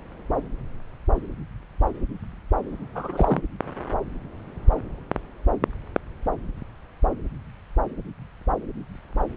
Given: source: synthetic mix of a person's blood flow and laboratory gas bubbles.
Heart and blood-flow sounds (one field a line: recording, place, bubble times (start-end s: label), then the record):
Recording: Doppler ultrasound of blood flow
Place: subclavian vein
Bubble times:
2.95-3.42 s: bubbles
From the record:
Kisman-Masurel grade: 222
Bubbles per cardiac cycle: several, 3 to 8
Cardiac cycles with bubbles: 10 to 50%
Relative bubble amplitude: moderate (0.250 to 0.450)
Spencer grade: 2 (many but less than half of the cardiac periods contain bubble signals, singularly or in groups)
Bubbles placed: anywhere in the cardiac cycle